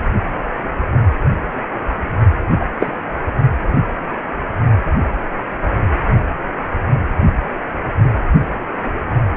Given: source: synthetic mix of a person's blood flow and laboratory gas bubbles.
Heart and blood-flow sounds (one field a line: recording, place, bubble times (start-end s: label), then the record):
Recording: Doppler ultrasound of blood flow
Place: precordium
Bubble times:
2.59-2.67 s: bubbles
2.80-2.95 s: bubbles
From the record:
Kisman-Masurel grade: 113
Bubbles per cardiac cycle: 1 to 2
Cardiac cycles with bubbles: 1 to 10%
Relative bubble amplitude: loud (0.450 to 0.775)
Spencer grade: 1 (occasional bubble signal discernible with the cardiac motion signal, with majority of cardiac periods free of bubbles)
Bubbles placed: only in the low amplitude regions of the cardiac cycle